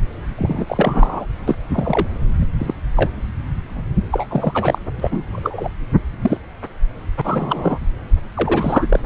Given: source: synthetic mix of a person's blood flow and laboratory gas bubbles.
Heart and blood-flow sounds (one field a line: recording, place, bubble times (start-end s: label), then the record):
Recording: Doppler ultrasound of blood flow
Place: subclavian vein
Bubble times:
0.37-1.26 s: bubbles
1.48-1.56 s: bubbles
1.72-2.07 s: bubbles
2.41-2.46 s: bubbles
2.59-2.73 s: bubbles
2.96-3.10 s: bubbles
4.12-4.78 s: bubbles
4.98-5.23 s: bubbles
5.32-5.70 s: bubbles
6.21-6.38 s: bubbles
7.17-7.21 s: bubbles
7.24-7.78 s: bubbles
8.34-9.00 s: bubbles
From the record:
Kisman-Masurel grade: 243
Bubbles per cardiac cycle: several, 3 to 8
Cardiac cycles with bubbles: 100%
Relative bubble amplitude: loud (0.450 to 0.775)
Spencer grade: 3 (all of the cardiac periods contain showers or single bubble signals, but not dominating or overriding the cardiac motion signals)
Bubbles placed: anywhere in the cardiac cycle